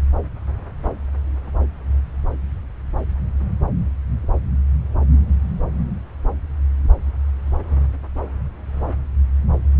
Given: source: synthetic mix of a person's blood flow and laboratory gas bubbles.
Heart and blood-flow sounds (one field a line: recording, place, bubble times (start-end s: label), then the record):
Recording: Doppler ultrasound of blood flow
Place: subclavian vein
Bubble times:
no bubbles
From the record:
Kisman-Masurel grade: 000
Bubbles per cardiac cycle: 0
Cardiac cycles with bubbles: 0%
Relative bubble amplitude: no bubbles discernible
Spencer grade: 0 (complete lack of bubble signals)